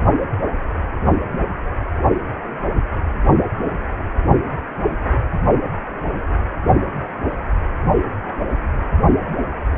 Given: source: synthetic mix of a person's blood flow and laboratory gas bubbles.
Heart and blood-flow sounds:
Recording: Doppler ultrasound of blood flow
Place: precordium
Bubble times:
no bubbles
From the record:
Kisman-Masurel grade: 000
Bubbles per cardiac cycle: 0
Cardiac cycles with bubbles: 0%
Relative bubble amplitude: no bubbles discernible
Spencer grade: 0 (complete lack of bubble signals)

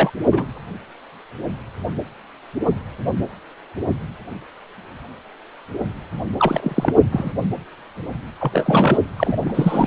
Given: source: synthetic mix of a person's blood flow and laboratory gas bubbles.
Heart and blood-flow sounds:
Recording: Doppler ultrasound of blood flow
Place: precordium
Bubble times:
0.00-0.10 s: bubbles
0.32-0.46 s: bubbles
6.39-6.93 s: bubbles
7.12-7.31 s: bubbles
8.40-8.97 s: bubbles
9.17-9.86 s: bubbles
From the record:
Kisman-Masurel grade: 332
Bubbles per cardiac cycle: rolling drumbeat, 9 or more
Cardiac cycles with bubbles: 50 to 99%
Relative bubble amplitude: moderate (0.250 to 0.450)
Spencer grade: 3 (all of the cardiac periods contain showers or single bubble signals, but not dominating or overriding the cardiac motion signals)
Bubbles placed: anywhere in the cardiac cycle

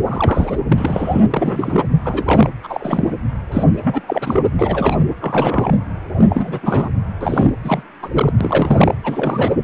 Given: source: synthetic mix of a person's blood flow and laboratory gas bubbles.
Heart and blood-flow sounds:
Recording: Doppler ultrasound of blood flow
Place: precordium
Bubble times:
0.04-0.62 s: bubbles
0.71-1.25 s: bubbles
1.30-1.86 s: bubbles
2.04-2.50 s: bubbles
2.63-3.13 s: bubbles
3.52-3.64 s: bubbles
3.75-4.44 s: bubbles
4.59-4.97 s: bubbles
5.21-5.73 s: bubbles
6.17-6.89 s: bubbles
7.21-7.53 s: bubbles
7.64-7.83 s: bubbles
8.03-8.10 s: bubbles
8.13-8.33 s: bubbles
8.41-8.95 s: bubbles
9.04-9.53 s: bubbles
9.62-9.64 s: bubbles
From the record:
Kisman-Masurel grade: 342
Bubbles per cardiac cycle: rolling drumbeat, 9 or more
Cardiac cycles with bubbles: 100%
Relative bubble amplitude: moderate (0.250 to 0.450)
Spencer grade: 3 (all of the cardiac periods contain showers or single bubble signals, but not dominating or overriding the cardiac motion signals)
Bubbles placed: anywhere in the cardiac cycle

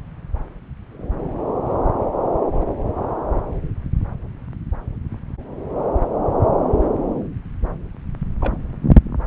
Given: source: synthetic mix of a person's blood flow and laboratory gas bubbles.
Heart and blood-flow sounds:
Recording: Doppler ultrasound of blood flow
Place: subclavian vein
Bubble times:
8.40-8.57 s: bubbles
From the record:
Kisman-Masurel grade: 111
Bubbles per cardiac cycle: 1 to 2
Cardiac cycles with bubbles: 1 to 10%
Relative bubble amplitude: barely perceptible (0.100 to 0.250)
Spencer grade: 1 (occasional bubble signal discernible with the cardiac motion signal, with majority of cardiac periods free of bubbles)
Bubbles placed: anywhere in the cardiac cycle

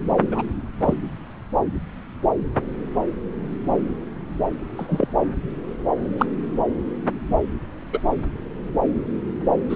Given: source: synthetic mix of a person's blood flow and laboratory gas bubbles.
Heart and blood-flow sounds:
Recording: Doppler ultrasound of blood flow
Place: subclavian vein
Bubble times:
0.32-0.42 s: bubbles
0.80-0.94 s: bubbles
4.77-5.08 s: bubbles
6.17-6.26 s: bubbles
7.92-8.00 s: bubbles
9.70-9.76 s: bubbles
From the record:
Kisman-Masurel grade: 122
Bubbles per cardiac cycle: 1 to 2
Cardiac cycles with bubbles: 10 to 50%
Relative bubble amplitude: moderate (0.250 to 0.450)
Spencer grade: 2 (many but less than half of the cardiac periods contain bubble signals, singularly or in groups)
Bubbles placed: anywhere in the cardiac cycle

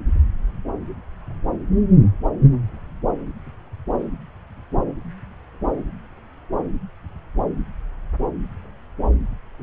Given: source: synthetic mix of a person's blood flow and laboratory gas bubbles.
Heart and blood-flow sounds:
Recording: Doppler ultrasound of blood flow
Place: subclavian vein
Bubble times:
no bubbles
From the record:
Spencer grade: 0 (complete lack of bubble signals)

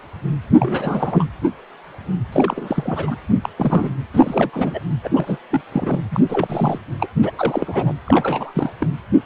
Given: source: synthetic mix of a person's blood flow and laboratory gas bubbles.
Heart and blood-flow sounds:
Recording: Doppler ultrasound of blood flow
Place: precordium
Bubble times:
0.58-1.26 s: bubbles
2.32-3.16 s: bubbles
3.29-3.35 s: bubbles
3.42-3.49 s: bubbles
3.56-3.91 s: bubbles
4.14-4.50 s: bubbles
4.53-4.80 s: bubbles
5.04-5.09 s: bubbles
5.12-5.38 s: bubbles
5.51-5.61 s: bubbles
5.72-6.00 s: bubbles
6.11-6.20 s: bubbles
6.28-6.79 s: bubbles
7.00-7.08 s: bubbles
7.22-7.32 s: bubbles
7.37-7.93 s: bubbles
8.05-8.72 s: bubbles
8.79-8.87 s: bubbles
From the record:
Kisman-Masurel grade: 332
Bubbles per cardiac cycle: rolling drumbeat, 9 or more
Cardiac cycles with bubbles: 50 to 99%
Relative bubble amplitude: moderate (0.250 to 0.450)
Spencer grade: 3 (all of the cardiac periods contain showers or single bubble signals, but not dominating or overriding the cardiac motion signals)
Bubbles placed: anywhere in the cardiac cycle

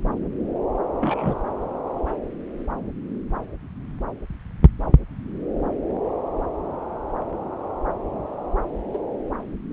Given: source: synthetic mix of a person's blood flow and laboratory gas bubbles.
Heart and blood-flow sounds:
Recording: Doppler ultrasound of blood flow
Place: subclavian vein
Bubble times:
1.00-1.35 s: bubbles
8.93-8.98 s: bubbles
From the record:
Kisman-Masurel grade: 122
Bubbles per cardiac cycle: 1 to 2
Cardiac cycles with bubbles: 10 to 50%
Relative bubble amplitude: moderate (0.250 to 0.450)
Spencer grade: 2 (many but less than half of the cardiac periods contain bubble signals, singularly or in groups)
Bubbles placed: anywhere in the cardiac cycle

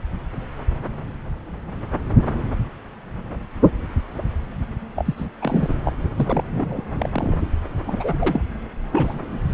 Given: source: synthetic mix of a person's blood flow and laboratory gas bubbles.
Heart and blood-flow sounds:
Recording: Doppler ultrasound of blood flow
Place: subclavian vein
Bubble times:
4.96-5.14 s: bubbles
5.17-5.26 s: bubbles
5.42-5.76 s: bubbles
5.84-5.92 s: bubbles
6.17-6.43 s: bubbles
6.50-6.85 s: bubbles
6.91-7.38 s: bubbles
7.87-8.41 s: bubbles
8.92-9.49 s: bubbles
From the record:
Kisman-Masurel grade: 332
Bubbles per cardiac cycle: rolling drumbeat, 9 or more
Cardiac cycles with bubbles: 50 to 99%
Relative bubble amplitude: moderate (0.250 to 0.450)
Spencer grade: 3 (all of the cardiac periods contain showers or single bubble signals, but not dominating or overriding the cardiac motion signals)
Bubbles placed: anywhere in the cardiac cycle

